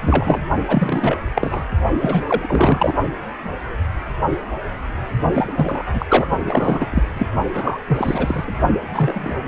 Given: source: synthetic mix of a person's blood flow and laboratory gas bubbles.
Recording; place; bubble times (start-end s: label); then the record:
Doppler ultrasound of blood flow; precordium
0.00-0.47 s: bubbles
0.68-1.18 s: bubbles
1.34-1.65 s: bubbles
1.99-2.25 s: bubbles
2.28-2.94 s: bubbles
5.33-5.52 s: bubbles
5.55-5.83 s: bubbles
5.92-6.06 s: bubbles
6.09-6.26 s: bubbles
6.40-6.87 s: bubbles
6.91-7.02 s: bubbles
7.14-7.26 s: bubbles
7.54-7.78 s: bubbles
7.88-8.54 s: bubbles
8.93-9.42 s: bubbles
From the record:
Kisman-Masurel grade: 333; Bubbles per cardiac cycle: rolling drumbeat, 9 or more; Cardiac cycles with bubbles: 50 to 99%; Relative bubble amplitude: loud (0.450 to 0.775); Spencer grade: 3 (all of the cardiac periods contain showers or single bubble signals, but not dominating or overriding the cardiac motion signals); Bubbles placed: only in the low amplitude regions of the cardiac cycle